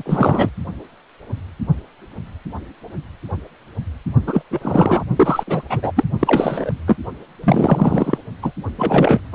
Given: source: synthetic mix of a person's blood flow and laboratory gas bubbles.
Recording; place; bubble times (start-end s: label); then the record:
Doppler ultrasound of blood flow; precordium
0.00-0.03 s: bubbles
0.05-0.49 s: bubbles
4.26-4.44 s: bubbles
4.50-5.03 s: bubbles
5.17-5.43 s: bubbles
5.47-5.67 s: bubbles
5.69-5.92 s: bubbles
5.96-6.04 s: bubbles
6.19-6.72 s: bubbles
6.87-6.96 s: bubbles
7.43-8.18 s: bubbles
8.42-8.52 s: bubbles
8.78-9.20 s: bubbles
9.32-9.35 s: bubbles
From the record:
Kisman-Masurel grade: 333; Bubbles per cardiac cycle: rolling drumbeat, 9 or more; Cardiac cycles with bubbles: 50 to 99%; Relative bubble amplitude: loud (0.450 to 0.775); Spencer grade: 3 (all of the cardiac periods contain showers or single bubble signals, but not dominating or overriding the cardiac motion signals); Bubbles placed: only in the low amplitude regions of the cardiac cycle